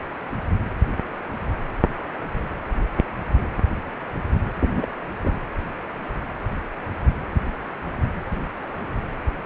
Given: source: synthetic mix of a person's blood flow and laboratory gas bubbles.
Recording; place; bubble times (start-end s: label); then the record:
Doppler ultrasound of blood flow; precordium
4.61-4.86 s: bubbles
5.23-5.38 s: bubbles
From the record:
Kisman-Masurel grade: 112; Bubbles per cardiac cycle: 1 to 2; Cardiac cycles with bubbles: 1 to 10%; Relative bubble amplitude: moderate (0.250 to 0.450); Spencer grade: 1 (occasional bubble signal discernible with the cardiac motion signal, with majority of cardiac periods free of bubbles); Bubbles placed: anywhere in the cardiac cycle